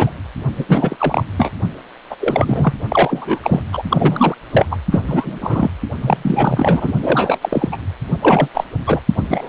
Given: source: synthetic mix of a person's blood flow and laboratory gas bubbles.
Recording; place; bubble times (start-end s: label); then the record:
Doppler ultrasound of blood flow; precordium
0.00-0.12 s: bubbles
0.57-0.65 s: bubbles
0.68-1.24 s: bubbles
1.38-1.51 s: bubbles
2.10-2.15 s: bubbles
2.20-2.73 s: bubbles
2.89-3.39 s: bubbles
3.44-3.62 s: bubbles
3.73-3.83 s: bubbles
3.90-4.35 s: bubbles
4.51-4.65 s: bubbles
4.71-4.77 s: bubbles
4.91-5.03 s: bubbles
5.07-5.38 s: bubbles
5.40-5.71 s: bubbles
6.01-6.92 s: bubbles
7.01-7.38 s: bubbles
7.41-7.70 s: bubbles
7.72-7.77 s: bubbles
8.21-8.48 s: bubbles
8.54-8.64 s: bubbles
8.86-9.01 s: bubbles
9.16-9.25 s: bubbles
9.29-9.49 s: bubbles
From the record:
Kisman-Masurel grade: 333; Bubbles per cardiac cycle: rolling drumbeat, 9 or more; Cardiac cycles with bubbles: 50 to 99%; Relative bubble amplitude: loud (0.450 to 0.775); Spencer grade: 3 (all of the cardiac periods contain showers or single bubble signals, but not dominating or overriding the cardiac motion signals); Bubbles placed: only in the low amplitude regions of the cardiac cycle